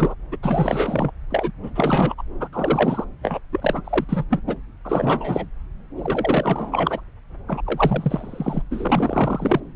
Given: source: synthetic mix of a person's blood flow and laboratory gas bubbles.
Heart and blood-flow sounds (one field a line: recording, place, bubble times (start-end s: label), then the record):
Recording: Doppler ultrasound of blood flow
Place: subclavian vein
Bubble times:
0.00-0.14 s: bubbles
0.31-0.36 s: bubbles
0.42-1.11 s: bubbles
1.30-1.52 s: bubbles
1.63-1.70 s: bubbles
1.75-2.14 s: bubbles
2.18-2.23 s: bubbles
2.40-2.48 s: bubbles
2.52-3.04 s: bubbles
3.23-3.39 s: bubbles
3.52-3.81 s: bubbles
3.84-4.04 s: bubbles
4.09-4.25 s: bubbles
4.30-4.41 s: bubbles
4.47-4.54 s: bubbles
4.84-5.47 s: bubbles
5.96-7.01 s: bubbles
7.48-7.62 s: bubbles
7.66-8.62 s: bubbles
8.71-9.61 s: bubbles
From the record:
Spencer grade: 3 (all of the cardiac periods contain showers or single bubble signals, but not dominating or overriding the cardiac motion signals)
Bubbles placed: anywhere in the cardiac cycle